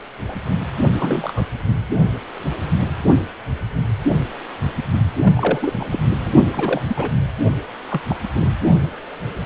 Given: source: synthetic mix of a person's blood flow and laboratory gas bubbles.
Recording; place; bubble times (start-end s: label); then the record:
Doppler ultrasound of blood flow; precordium
0.28-0.36 s: bubbles
0.93-1.45 s: bubbles
5.23-5.89 s: bubbles
5.92-5.99 s: bubbles
6.20-6.32 s: bubbles
6.52-6.81 s: bubbles
6.88-7.09 s: bubbles
7.91-8.00 s: bubbles
8.09-8.16 s: bubbles
8.34-8.52 s: bubbles
From the record:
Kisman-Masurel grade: 232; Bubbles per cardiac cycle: several, 3 to 8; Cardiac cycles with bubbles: 50 to 99%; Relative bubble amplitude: moderate (0.250 to 0.450); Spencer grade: 3 (all of the cardiac periods contain showers or single bubble signals, but not dominating or overriding the cardiac motion signals); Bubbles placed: only in the low amplitude regions of the cardiac cycle